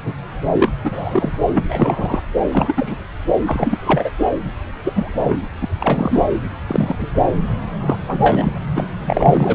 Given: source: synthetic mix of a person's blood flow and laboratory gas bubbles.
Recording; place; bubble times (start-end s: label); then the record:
Doppler ultrasound of blood flow; subclavian vein
0.04-0.14 s: bubbles
0.56-0.69 s: bubbles
0.83-1.38 s: bubbles
1.54-2.22 s: bubbles
2.52-3.03 s: bubbles
3.47-4.11 s: bubbles
4.84-4.93 s: bubbles
4.96-5.38 s: bubbles
5.61-5.68 s: bubbles
5.80-6.26 s: bubbles
6.67-6.96 s: bubbles
7.00-7.07 s: bubbles
7.81-7.97 s: bubbles
8.07-8.52 s: bubbles
8.75-8.88 s: bubbles
9.05-9.55 s: bubbles
From the record:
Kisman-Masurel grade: 243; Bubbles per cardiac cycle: several, 3 to 8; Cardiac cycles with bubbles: 100%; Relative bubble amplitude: loud (0.450 to 0.775); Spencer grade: 3 (all of the cardiac periods contain showers or single bubble signals, but not dominating or overriding the cardiac motion signals); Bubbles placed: anywhere in the cardiac cycle